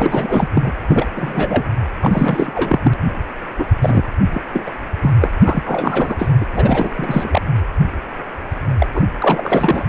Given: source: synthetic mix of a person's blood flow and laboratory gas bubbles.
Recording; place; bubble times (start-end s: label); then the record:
Doppler ultrasound of blood flow; precordium
0.00-0.48 s: bubbles
0.55-0.73 s: bubbles
0.87-1.08 s: bubbles
1.15-1.65 s: bubbles
2.01-2.51 s: bubbles
2.54-2.79 s: bubbles
2.83-2.91 s: bubbles
3.57-3.65 s: bubbles
3.81-4.04 s: bubbles
4.33-4.42 s: bubbles
4.54-4.72 s: bubbles
5.02-5.13 s: bubbles
5.21-5.29 s: bubbles
5.44-6.16 s: bubbles
6.19-6.32 s: bubbles
6.41-6.46 s: bubbles
6.52-7.42 s: bubbles
8.79-8.87 s: bubbles
8.94-9.03 s: bubbles
9.19-9.84 s: bubbles
From the record:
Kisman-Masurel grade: 333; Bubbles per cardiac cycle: rolling drumbeat, 9 or more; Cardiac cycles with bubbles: 50 to 99%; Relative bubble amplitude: loud (0.450 to 0.775); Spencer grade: 3 (all of the cardiac periods contain showers or single bubble signals, but not dominating or overriding the cardiac motion signals); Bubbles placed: anywhere in the cardiac cycle